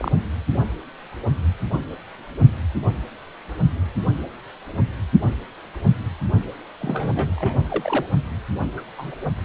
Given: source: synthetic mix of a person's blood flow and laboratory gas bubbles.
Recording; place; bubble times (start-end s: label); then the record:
Doppler ultrasound of blood flow; precordium
0.00-0.12 s: bubbles
6.80-7.31 s: bubbles
7.36-7.54 s: bubbles
7.69-8.06 s: bubbles
8.77-8.82 s: bubbles
8.98-9.14 s: bubbles
From the record:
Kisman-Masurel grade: 222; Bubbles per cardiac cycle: several, 3 to 8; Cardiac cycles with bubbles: 10 to 50%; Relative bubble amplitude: moderate (0.250 to 0.450); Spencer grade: 2 (many but less than half of the cardiac periods contain bubble signals, singularly or in groups); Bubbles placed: only in the low amplitude regions of the cardiac cycle